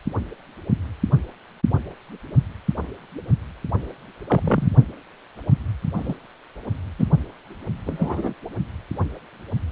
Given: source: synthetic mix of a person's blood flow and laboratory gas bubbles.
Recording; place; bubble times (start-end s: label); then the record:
Doppler ultrasound of blood flow; precordium
4.27-4.71 s: bubbles
5.96-6.15 s: bubbles
6.99-7.05 s: bubbles
7.87-8.34 s: bubbles
From the record:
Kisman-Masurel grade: 123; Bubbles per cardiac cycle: 1 to 2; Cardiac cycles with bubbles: 10 to 50%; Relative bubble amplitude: loud (0.450 to 0.775); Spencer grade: 2 (many but less than half of the cardiac periods contain bubble signals, singularly or in groups); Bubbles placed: only in the low amplitude regions of the cardiac cycle